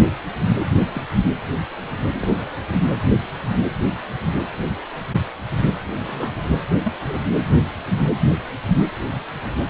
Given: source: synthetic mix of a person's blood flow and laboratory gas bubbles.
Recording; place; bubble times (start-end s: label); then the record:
Doppler ultrasound of blood flow; precordium
0.95-1.01 s: bubbles
2.13-2.45 s: bubbles
6.07-6.44 s: bubbles
6.84-6.93 s: bubbles
7.04-7.19 s: bubbles
8.04-8.10 s: bubbles
From the record:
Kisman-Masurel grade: 121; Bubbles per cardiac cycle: 1 to 2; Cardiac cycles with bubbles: 10 to 50%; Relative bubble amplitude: barely perceptible (0.100 to 0.250); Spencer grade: 2 (many but less than half of the cardiac periods contain bubble signals, singularly or in groups); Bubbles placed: anywhere in the cardiac cycle